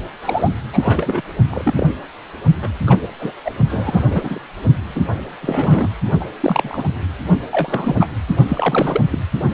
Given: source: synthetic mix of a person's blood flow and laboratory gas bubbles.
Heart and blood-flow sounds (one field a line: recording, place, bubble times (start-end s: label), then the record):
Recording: Doppler ultrasound of blood flow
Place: precordium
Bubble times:
0.22-0.49 s: bubbles
0.72-1.21 s: bubbles
1.50-1.87 s: bubbles
2.62-2.70 s: bubbles
2.87-2.97 s: bubbles
3.20-3.32 s: bubbles
3.45-3.51 s: bubbles
3.69-4.04 s: bubbles
4.07-4.39 s: bubbles
4.95-5.01 s: bubbles
5.41-5.90 s: bubbles
6.20-6.25 s: bubbles
6.40-6.84 s: bubbles
7.51-8.07 s: bubbles
8.48-9.01 s: bubbles
9.10-9.19 s: bubbles
From the record:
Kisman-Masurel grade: 242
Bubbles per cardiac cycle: several, 3 to 8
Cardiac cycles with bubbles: 100%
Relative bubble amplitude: moderate (0.250 to 0.450)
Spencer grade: 3 (all of the cardiac periods contain showers or single bubble signals, but not dominating or overriding the cardiac motion signals)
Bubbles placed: only in the low amplitude regions of the cardiac cycle